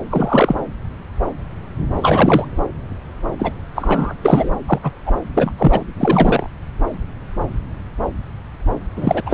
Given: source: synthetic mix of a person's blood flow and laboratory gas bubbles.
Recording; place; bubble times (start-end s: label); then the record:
Doppler ultrasound of blood flow; subclavian vein
0.09-0.55 s: bubbles
1.95-2.45 s: bubbles
3.39-3.52 s: bubbles
3.75-4.14 s: bubbles
4.21-4.50 s: bubbles
4.67-4.79 s: bubbles
4.82-4.92 s: bubbles
5.06-5.14 s: bubbles
5.34-5.51 s: bubbles
5.57-5.83 s: bubbles
5.96-6.46 s: bubbles
8.96-9.22 s: bubbles
9.25-9.34 s: bubbles
From the record:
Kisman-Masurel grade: 233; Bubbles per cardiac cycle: several, 3 to 8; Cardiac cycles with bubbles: 50 to 99%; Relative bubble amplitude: loud (0.450 to 0.775); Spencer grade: 3 (all of the cardiac periods contain showers or single bubble signals, but not dominating or overriding the cardiac motion signals); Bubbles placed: anywhere in the cardiac cycle